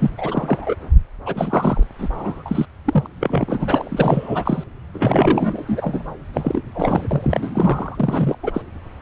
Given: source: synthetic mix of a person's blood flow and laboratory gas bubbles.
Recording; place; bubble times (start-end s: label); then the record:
Doppler ultrasound of blood flow; subclavian vein
0.00-0.11 s: bubbles
0.17-0.75 s: bubbles
1.26-1.83 s: bubbles
1.99-2.08 s: bubbles
2.13-2.42 s: bubbles
2.45-2.65 s: bubbles
2.84-3.07 s: bubbles
3.20-4.64 s: bubbles
4.94-6.04 s: bubbles
6.33-7.08 s: bubbles
7.10-7.50 s: bubbles
7.54-8.36 s: bubbles
8.43-8.51 s: bubbles
8.54-8.62 s: bubbles
From the record:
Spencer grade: 3 (all of the cardiac periods contain showers or single bubble signals, but not dominating or overriding the cardiac motion signals); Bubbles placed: anywhere in the cardiac cycle